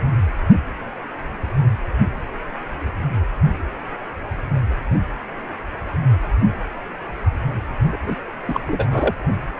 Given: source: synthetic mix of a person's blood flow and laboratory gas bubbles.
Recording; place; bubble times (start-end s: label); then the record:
Doppler ultrasound of blood flow; precordium
7.92-7.98 s: bubbles
8.07-8.16 s: bubbles
8.49-8.60 s: bubbles
8.67-9.14 s: bubbles
From the record:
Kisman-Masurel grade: 212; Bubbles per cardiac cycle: several, 3 to 8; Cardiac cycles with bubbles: 1 to 10%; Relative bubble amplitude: moderate (0.250 to 0.450); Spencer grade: 1 (occasional bubble signal discernible with the cardiac motion signal, with majority of cardiac periods free of bubbles); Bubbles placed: only in the low amplitude regions of the cardiac cycle